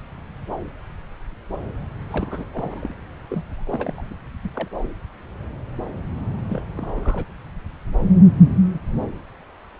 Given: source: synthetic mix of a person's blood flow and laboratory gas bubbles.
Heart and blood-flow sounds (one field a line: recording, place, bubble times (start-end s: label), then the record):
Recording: Doppler ultrasound of blood flow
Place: subclavian vein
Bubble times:
2.10-2.45 s: bubbles
2.53-2.92 s: bubbles
3.29-3.63 s: bubbles
3.67-4.18 s: bubbles
4.43-4.50 s: bubbles
4.54-4.68 s: bubbles
4.83-4.87 s: bubbles
6.49-6.63 s: bubbles
6.75-7.27 s: bubbles
From the record:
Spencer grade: 2 (many but less than half of the cardiac periods contain bubble signals, singularly or in groups)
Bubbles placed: anywhere in the cardiac cycle